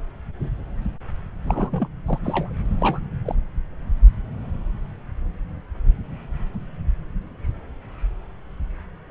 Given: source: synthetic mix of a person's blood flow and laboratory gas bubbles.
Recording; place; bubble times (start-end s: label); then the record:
Doppler ultrasound of blood flow; subclavian vein
1.45-1.88 s: bubbles
2.06-2.19 s: bubbles
2.23-2.54 s: bubbles
2.81-3.00 s: bubbles
3.25-3.35 s: bubbles
From the record:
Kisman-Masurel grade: 222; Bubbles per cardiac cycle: several, 3 to 8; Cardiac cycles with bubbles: 10 to 50%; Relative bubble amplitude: moderate (0.250 to 0.450); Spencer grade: 2 (many but less than half of the cardiac periods contain bubble signals, singularly or in groups); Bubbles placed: anywhere in the cardiac cycle